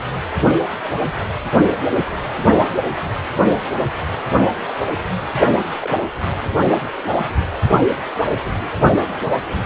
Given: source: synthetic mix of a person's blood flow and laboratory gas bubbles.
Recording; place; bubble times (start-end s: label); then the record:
Doppler ultrasound of blood flow; precordium
5.82-5.97 s: bubbles
From the record:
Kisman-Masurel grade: 111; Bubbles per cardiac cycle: 1 to 2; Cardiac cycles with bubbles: 1 to 10%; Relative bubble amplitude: barely perceptible (0.100 to 0.250); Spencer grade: 1 (occasional bubble signal discernible with the cardiac motion signal, with majority of cardiac periods free of bubbles); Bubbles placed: only in the low amplitude regions of the cardiac cycle